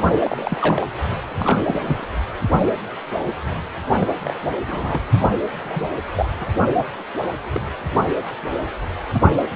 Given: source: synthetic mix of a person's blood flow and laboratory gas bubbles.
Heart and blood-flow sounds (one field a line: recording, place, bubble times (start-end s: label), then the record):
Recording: Doppler ultrasound of blood flow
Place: precordium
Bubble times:
0.23-0.86 s: bubbles
1.35-1.60 s: bubbles
1.66-1.79 s: bubbles
1.84-2.07 s: bubbles
2.65-2.76 s: bubbles
4.01-4.07 s: bubbles
4.25-4.33 s: bubbles
4.67-5.01 s: bubbles
5.19-5.31 s: bubbles
5.65-5.89 s: bubbles
6.15-6.28 s: bubbles
6.41-6.47 s: bubbles
6.75-6.84 s: bubbles
7.54-7.62 s: bubbles
9.13-9.21 s: bubbles
From the record:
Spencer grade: 3 (all of the cardiac periods contain showers or single bubble signals, but not dominating or overriding the cardiac motion signals)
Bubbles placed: anywhere in the cardiac cycle